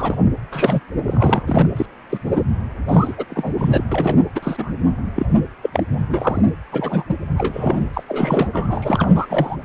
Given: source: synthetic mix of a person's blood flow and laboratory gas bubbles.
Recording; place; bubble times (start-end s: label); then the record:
Doppler ultrasound of blood flow; precordium
0.00-0.15 s: bubbles
0.51-0.80 s: bubbles
1.06-1.43 s: bubbles
1.46-1.67 s: bubbles
1.76-1.86 s: bubbles
2.09-2.19 s: bubbles
2.25-2.42 s: bubbles
2.88-3.14 s: bubbles
3.17-3.25 s: bubbles
3.30-3.53 s: bubbles
3.57-3.82 s: bubbles
3.92-4.22 s: bubbles
4.35-4.72 s: bubbles
5.15-5.27 s: bubbles
5.62-5.70 s: bubbles
5.73-5.83 s: bubbles
6.09-6.42 s: bubbles
6.72-7.04 s: bubbles
7.09-7.18 s: bubbles
7.38-7.80 s: bubbles
7.93-8.03 s: bubbles
8.08-8.48 s: bubbles
8.53-9.08 s: bubbles
9.14-9.26 s: bubbles
9.29-9.56 s: bubbles
From the record:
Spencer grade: 3 (all of the cardiac periods contain showers or single bubble signals, but not dominating or overriding the cardiac motion signals); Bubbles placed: anywhere in the cardiac cycle